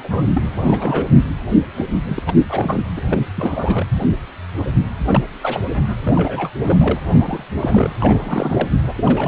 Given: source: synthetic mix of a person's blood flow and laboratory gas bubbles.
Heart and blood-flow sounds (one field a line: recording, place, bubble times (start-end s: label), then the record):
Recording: Doppler ultrasound of blood flow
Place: precordium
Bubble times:
0.00-0.27 s: bubbles
0.33-0.43 s: bubbles
0.57-1.08 s: bubbles
1.76-1.86 s: bubbles
2.06-2.23 s: bubbles
2.27-2.35 s: bubbles
2.49-2.83 s: bubbles
2.97-3.22 s: bubbles
3.35-3.86 s: bubbles
5.07-5.21 s: bubbles
5.41-5.60 s: bubbles
5.74-5.83 s: bubbles
6.05-6.50 s: bubbles
6.63-7.00 s: bubbles
7.07-7.45 s: bubbles
7.61-7.90 s: bubbles
8.00-8.69 s: bubbles
8.82-8.93 s: bubbles
8.97-9.28 s: bubbles
From the record:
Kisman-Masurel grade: 332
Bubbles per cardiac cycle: rolling drumbeat, 9 or more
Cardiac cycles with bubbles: 50 to 99%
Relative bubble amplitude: moderate (0.250 to 0.450)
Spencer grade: 3 (all of the cardiac periods contain showers or single bubble signals, but not dominating or overriding the cardiac motion signals)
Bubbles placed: anywhere in the cardiac cycle